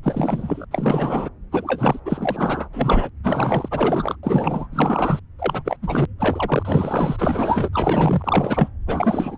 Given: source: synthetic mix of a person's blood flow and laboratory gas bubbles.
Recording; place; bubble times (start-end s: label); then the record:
Doppler ultrasound of blood flow; subclavian vein
0.03-0.65 s: bubbles
0.71-1.29 s: bubbles
1.52-1.99 s: bubbles
2.05-2.69 s: bubbles
2.73-3.09 s: bubbles
3.24-3.69 s: bubbles
3.71-4.17 s: bubbles
4.23-4.67 s: bubbles
4.73-5.20 s: bubbles
5.39-5.77 s: bubbles
5.82-6.06 s: bubbles
6.19-7.69 s: bubbles
7.73-8.68 s: bubbles
8.87-9.37 s: bubbles
From the record:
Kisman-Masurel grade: 343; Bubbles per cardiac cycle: rolling drumbeat, 9 or more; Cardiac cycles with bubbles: 100%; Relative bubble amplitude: loud (0.450 to 0.775); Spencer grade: 3 (all of the cardiac periods contain showers or single bubble signals, but not dominating or overriding the cardiac motion signals); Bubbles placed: anywhere in the cardiac cycle